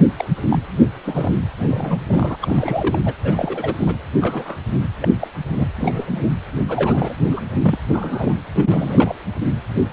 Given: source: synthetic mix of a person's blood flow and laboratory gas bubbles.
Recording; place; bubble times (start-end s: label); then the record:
Doppler ultrasound of blood flow; precordium
0.18-0.25 s: bubbles
0.50-0.59 s: bubbles
1.05-1.31 s: bubbles
1.58-2.02 s: bubbles
2.07-2.37 s: bubbles
2.42-2.99 s: bubbles
3.06-3.14 s: bubbles
3.23-3.75 s: bubbles
3.77-3.96 s: bubbles
4.21-4.61 s: bubbles
4.72-4.79 s: bubbles
5.01-5.08 s: bubbles
5.20-5.28 s: bubbles
5.54-5.67 s: bubbles
5.75-6.06 s: bubbles
6.11-6.33 s: bubbles
6.68-7.16 s: bubbles
7.31-7.41 s: bubbles
7.63-7.78 s: bubbles
7.93-8.34 s: bubbles
8.55-9.15 s: bubbles
9.75-9.86 s: bubbles
9.91-9.93 s: bubbles
From the record:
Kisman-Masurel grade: 242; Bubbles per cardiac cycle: several, 3 to 8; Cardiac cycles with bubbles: 100%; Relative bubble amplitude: moderate (0.250 to 0.450); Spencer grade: 3 (all of the cardiac periods contain showers or single bubble signals, but not dominating or overriding the cardiac motion signals); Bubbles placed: anywhere in the cardiac cycle